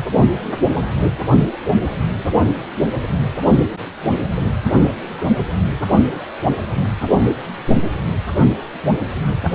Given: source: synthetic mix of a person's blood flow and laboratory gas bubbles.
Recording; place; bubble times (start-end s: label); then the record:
Doppler ultrasound of blood flow; precordium
no bubbles
From the record:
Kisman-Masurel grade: 000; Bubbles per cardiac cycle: 0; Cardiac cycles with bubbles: 0%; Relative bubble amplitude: no bubbles discernible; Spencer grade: 0 (complete lack of bubble signals)